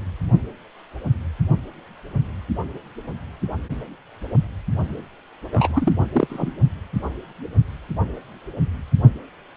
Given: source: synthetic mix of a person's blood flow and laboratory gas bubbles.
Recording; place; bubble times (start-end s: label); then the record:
Doppler ultrasound of blood flow; precordium
5.52-5.93 s: bubbles
6.14-6.50 s: bubbles
From the record:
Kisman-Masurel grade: 222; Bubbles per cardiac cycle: several, 3 to 8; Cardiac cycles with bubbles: 10 to 50%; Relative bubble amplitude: moderate (0.250 to 0.450); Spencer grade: 2 (many but less than half of the cardiac periods contain bubble signals, singularly or in groups); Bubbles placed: only in the low amplitude regions of the cardiac cycle